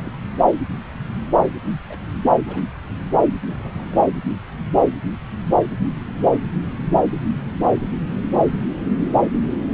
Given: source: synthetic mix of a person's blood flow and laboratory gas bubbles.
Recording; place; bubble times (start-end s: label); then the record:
Doppler ultrasound of blood flow; subclavian vein
0.00-0.17 s: bubbles
1.90-1.97 s: bubbles
2.47-2.71 s: bubbles
3.46-4.03 s: bubbles
From the record:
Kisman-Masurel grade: 121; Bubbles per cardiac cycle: 1 to 2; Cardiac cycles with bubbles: 10 to 50%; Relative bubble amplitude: barely perceptible (0.100 to 0.250); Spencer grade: 2 (many but less than half of the cardiac periods contain bubble signals, singularly or in groups); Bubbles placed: anywhere in the cardiac cycle